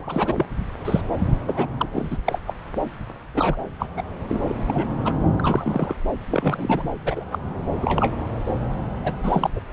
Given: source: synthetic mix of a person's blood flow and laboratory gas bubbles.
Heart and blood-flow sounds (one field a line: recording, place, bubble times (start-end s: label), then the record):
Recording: Doppler ultrasound of blood flow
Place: subclavian vein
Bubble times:
0.00-0.46 s: bubbles
0.85-1.01 s: bubbles
1.47-1.67 s: bubbles
1.78-1.89 s: bubbles
1.93-2.17 s: bubbles
2.24-2.39 s: bubbles
2.47-2.54 s: bubbles
3.34-3.57 s: bubbles
3.79-3.87 s: bubbles
3.96-4.03 s: bubbles
4.28-4.56 s: bubbles
4.68-4.88 s: bubbles
5.05-5.12 s: bubbles
5.39-5.96 s: bubbles
6.31-6.91 s: bubbles
7.04-7.25 s: bubbles
7.33-7.39 s: bubbles
7.82-8.16 s: bubbles
9.04-9.14 s: bubbles
9.23-9.50 s: bubbles
9.55-9.60 s: bubbles
From the record:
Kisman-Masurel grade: 242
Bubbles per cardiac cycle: several, 3 to 8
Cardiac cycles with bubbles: 100%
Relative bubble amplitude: moderate (0.250 to 0.450)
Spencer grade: 3 (all of the cardiac periods contain showers or single bubble signals, but not dominating or overriding the cardiac motion signals)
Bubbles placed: anywhere in the cardiac cycle